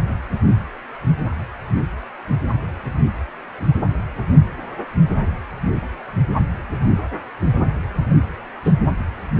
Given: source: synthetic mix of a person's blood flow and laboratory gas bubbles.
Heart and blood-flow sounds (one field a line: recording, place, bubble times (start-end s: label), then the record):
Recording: Doppler ultrasound of blood flow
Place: precordium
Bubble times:
8.64-8.71 s: bubbles
From the record:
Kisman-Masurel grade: 113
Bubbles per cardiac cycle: 1 to 2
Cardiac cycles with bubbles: 1 to 10%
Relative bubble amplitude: loud (0.450 to 0.775)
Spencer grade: 1 (occasional bubble signal discernible with the cardiac motion signal, with majority of cardiac periods free of bubbles)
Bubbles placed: anywhere in the cardiac cycle